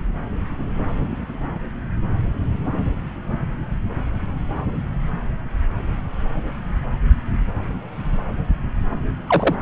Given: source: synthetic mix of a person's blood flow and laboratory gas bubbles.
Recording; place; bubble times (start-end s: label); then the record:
Doppler ultrasound of blood flow; subclavian vein
9.28-9.55 s: bubbles
From the record:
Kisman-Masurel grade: 113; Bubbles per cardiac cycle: 1 to 2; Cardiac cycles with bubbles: 1 to 10%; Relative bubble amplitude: loud (0.450 to 0.775); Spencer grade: 1 (occasional bubble signal discernible with the cardiac motion signal, with majority of cardiac periods free of bubbles); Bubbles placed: anywhere in the cardiac cycle